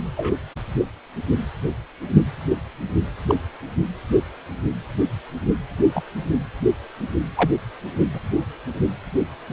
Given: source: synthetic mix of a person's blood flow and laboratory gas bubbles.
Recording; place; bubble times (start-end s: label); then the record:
Doppler ultrasound of blood flow; precordium
0.17-0.37 s: bubbles
3.28-3.35 s: bubbles
5.95-6.03 s: bubbles
7.37-7.50 s: bubbles
8.13-8.21 s: bubbles
From the record:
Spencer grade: 2 (many but less than half of the cardiac periods contain bubble signals, singularly or in groups); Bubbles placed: anywhere in the cardiac cycle